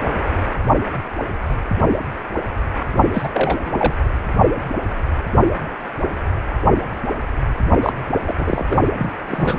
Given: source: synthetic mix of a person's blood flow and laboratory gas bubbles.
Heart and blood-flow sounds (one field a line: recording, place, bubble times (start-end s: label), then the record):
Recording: Doppler ultrasound of blood flow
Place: precordium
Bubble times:
3.13-3.28 s: bubbles
3.33-3.57 s: bubbles
3.65-3.72 s: bubbles
3.77-3.94 s: bubbles
7.83-7.93 s: bubbles
8.25-8.66 s: bubbles
8.69-8.79 s: bubbles
8.98-9.12 s: bubbles
9.28-9.59 s: bubbles
From the record:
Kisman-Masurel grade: 222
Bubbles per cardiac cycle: several, 3 to 8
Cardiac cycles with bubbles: 10 to 50%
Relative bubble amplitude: moderate (0.250 to 0.450)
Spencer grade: 2 (many but less than half of the cardiac periods contain bubble signals, singularly or in groups)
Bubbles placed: only in the low amplitude regions of the cardiac cycle